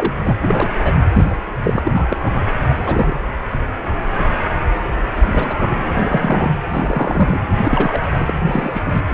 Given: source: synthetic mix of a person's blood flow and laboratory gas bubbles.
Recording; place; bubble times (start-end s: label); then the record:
Doppler ultrasound of blood flow; precordium
0.00-0.14 s: bubbles
0.24-0.39 s: bubbles
0.43-0.70 s: bubbles
0.83-0.93 s: bubbles
1.14-1.37 s: bubbles
1.64-1.82 s: bubbles
1.86-2.17 s: bubbles
2.22-2.43 s: bubbles
2.68-3.21 s: bubbles
5.25-5.80 s: bubbles
5.94-6.54 s: bubbles
6.70-7.40 s: bubbles
7.63-8.31 s: bubbles
8.46-8.82 s: bubbles
8.86-9.02 s: bubbles
From the record:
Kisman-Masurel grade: 233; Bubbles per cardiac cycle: several, 3 to 8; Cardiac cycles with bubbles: 50 to 99%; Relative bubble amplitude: loud (0.450 to 0.775); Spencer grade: 3 (all of the cardiac periods contain showers or single bubble signals, but not dominating or overriding the cardiac motion signals); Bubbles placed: anywhere in the cardiac cycle